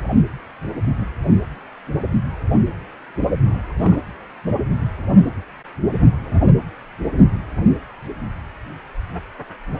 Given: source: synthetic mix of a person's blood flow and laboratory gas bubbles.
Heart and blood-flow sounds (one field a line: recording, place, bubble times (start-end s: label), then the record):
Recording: Doppler ultrasound of blood flow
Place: precordium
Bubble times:
3.44-3.59 s: bubbles
3.69-3.73 s: bubbles
3.78-4.00 s: bubbles
From the record:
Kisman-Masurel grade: 211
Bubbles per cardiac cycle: several, 3 to 8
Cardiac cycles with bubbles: 1 to 10%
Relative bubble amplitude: barely perceptible (0.100 to 0.250)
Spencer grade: 1 (occasional bubble signal discernible with the cardiac motion signal, with majority of cardiac periods free of bubbles)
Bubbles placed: anywhere in the cardiac cycle